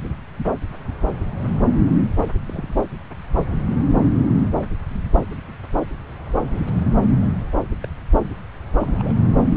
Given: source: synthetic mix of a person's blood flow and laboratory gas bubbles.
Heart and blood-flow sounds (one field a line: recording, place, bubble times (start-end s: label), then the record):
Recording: Doppler ultrasound of blood flow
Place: subclavian vein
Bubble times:
2.18-2.24 s: bubbles
2.44-2.77 s: bubbles
6.53-6.59 s: bubbles
6.75-6.86 s: bubbles
7.82-7.87 s: bubbles
8.80-9.15 s: bubbles
From the record:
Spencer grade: 2 (many but less than half of the cardiac periods contain bubble signals, singularly or in groups)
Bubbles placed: anywhere in the cardiac cycle